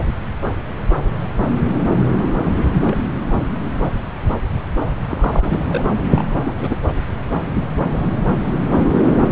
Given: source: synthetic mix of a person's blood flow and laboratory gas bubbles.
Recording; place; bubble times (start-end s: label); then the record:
Doppler ultrasound of blood flow; subclavian vein
2.16-2.27 s: bubbles
2.46-2.50 s: bubbles
2.58-2.67 s: bubbles
2.85-2.97 s: bubbles
5.09-5.64 s: bubbles
5.68-5.96 s: bubbles
6.10-6.24 s: bubbles
6.40-6.54 s: bubbles
6.58-6.76 s: bubbles
From the record:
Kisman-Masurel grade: 222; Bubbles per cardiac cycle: several, 3 to 8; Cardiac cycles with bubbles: 10 to 50%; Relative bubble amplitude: moderate (0.250 to 0.450); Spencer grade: 2 (many but less than half of the cardiac periods contain bubble signals, singularly or in groups); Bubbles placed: anywhere in the cardiac cycle